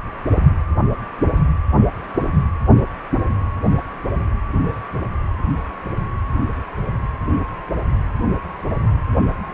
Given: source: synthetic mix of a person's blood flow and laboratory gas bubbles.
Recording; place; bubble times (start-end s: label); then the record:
Doppler ultrasound of blood flow; precordium
no bubbles
From the record:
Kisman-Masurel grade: 000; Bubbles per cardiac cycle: 0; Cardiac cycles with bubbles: 0%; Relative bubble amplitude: no bubbles discernible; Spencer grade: 0 (complete lack of bubble signals)